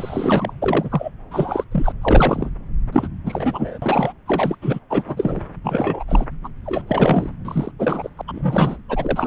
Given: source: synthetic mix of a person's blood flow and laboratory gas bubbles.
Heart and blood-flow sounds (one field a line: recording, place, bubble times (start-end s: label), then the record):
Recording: Doppler ultrasound of blood flow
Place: subclavian vein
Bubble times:
0.00-0.53 s: bubbles
0.61-1.11 s: bubbles
1.31-1.64 s: bubbles
1.72-1.92 s: bubbles
2.02-2.50 s: bubbles
2.92-3.08 s: bubbles
3.25-3.78 s: bubbles
3.82-4.12 s: bubbles
4.26-4.58 s: bubbles
4.61-4.79 s: bubbles
4.89-5.03 s: bubbles
5.05-5.41 s: bubbles
5.64-6.04 s: bubbles
6.08-6.24 s: bubbles
6.43-6.48 s: bubbles
6.64-7.29 s: bubbles
7.44-7.71 s: bubbles
7.79-8.09 s: bubbles
8.17-8.21 s: bubbles
8.28-8.77 s: bubbles
8.88-9.27 s: bubbles
From the record:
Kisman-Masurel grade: 342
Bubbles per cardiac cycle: rolling drumbeat, 9 or more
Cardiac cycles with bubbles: 100%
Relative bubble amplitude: moderate (0.250 to 0.450)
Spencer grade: 3 (all of the cardiac periods contain showers or single bubble signals, but not dominating or overriding the cardiac motion signals)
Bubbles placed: anywhere in the cardiac cycle